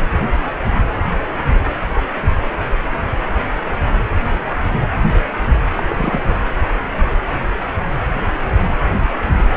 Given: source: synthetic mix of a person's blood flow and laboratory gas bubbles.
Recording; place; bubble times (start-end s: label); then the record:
Doppler ultrasound of blood flow; precordium
5.75-5.83 s: bubbles
5.89-6.21 s: bubbles
6.29-6.34 s: bubbles
From the record:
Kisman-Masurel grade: 212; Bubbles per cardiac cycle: several, 3 to 8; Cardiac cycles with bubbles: 1 to 10%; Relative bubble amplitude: moderate (0.250 to 0.450); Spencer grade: 1 (occasional bubble signal discernible with the cardiac motion signal, with majority of cardiac periods free of bubbles); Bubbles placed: anywhere in the cardiac cycle